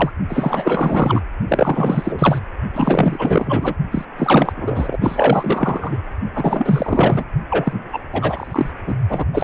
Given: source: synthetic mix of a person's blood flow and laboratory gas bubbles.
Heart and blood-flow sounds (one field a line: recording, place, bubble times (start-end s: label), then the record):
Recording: Doppler ultrasound of blood flow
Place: precordium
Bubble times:
0.00-0.11 s: bubbles
0.28-1.21 s: bubbles
1.48-2.39 s: bubbles
2.73-3.76 s: bubbles
3.91-4.05 s: bubbles
4.17-4.53 s: bubbles
4.57-4.98 s: bubbles
5.00-5.98 s: bubbles
6.34-7.24 s: bubbles
7.50-7.88 s: bubbles
7.92-8.01 s: bubbles
8.12-8.71 s: bubbles
8.87-8.95 s: bubbles
9.09-9.25 s: bubbles
9.33-9.44 s: bubbles
From the record:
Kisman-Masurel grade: 444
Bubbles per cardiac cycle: continuous sound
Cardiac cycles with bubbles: 100%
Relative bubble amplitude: maximal (0.775 to 0.999)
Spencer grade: 4 (maximum detectable bubble signal sounding continuously throughout systole and diastole of every cardiac period, and overriding the amplitude of the normal cardiac signals)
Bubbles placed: only in the low amplitude regions of the cardiac cycle